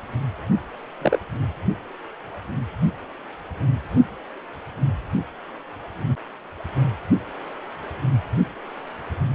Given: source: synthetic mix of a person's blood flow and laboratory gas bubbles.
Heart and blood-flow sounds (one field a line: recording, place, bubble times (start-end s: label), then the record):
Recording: Doppler ultrasound of blood flow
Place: precordium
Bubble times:
1.01-1.19 s: bubbles
From the record:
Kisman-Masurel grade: 112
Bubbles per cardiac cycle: 1 to 2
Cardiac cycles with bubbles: 1 to 10%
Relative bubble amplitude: moderate (0.250 to 0.450)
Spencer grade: 1 (occasional bubble signal discernible with the cardiac motion signal, with majority of cardiac periods free of bubbles)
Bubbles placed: anywhere in the cardiac cycle